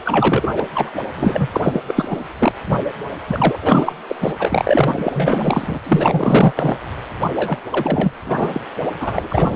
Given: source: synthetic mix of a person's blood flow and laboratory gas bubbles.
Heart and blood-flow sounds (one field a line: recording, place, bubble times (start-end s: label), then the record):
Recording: Doppler ultrasound of blood flow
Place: precordium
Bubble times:
0.05-0.47 s: bubbles
0.56-0.66 s: bubbles
0.74-0.90 s: bubbles
1.15-1.80 s: bubbles
1.88-2.21 s: bubbles
2.38-2.52 s: bubbles
2.66-2.77 s: bubbles
3.27-3.58 s: bubbles
3.61-3.93 s: bubbles
4.08-4.16 s: bubbles
4.20-4.33 s: bubbles
4.39-5.78 s: bubbles
5.83-6.78 s: bubbles
7.36-7.58 s: bubbles
7.70-8.12 s: bubbles
8.25-8.61 s: bubbles
9.00-9.56 s: bubbles
From the record:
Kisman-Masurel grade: 444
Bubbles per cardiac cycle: continuous sound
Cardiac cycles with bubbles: 100%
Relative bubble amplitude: maximal (0.775 to 0.999)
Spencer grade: 4 (maximum detectable bubble signal sounding continuously throughout systole and diastole of every cardiac period, and overriding the amplitude of the normal cardiac signals)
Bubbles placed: anywhere in the cardiac cycle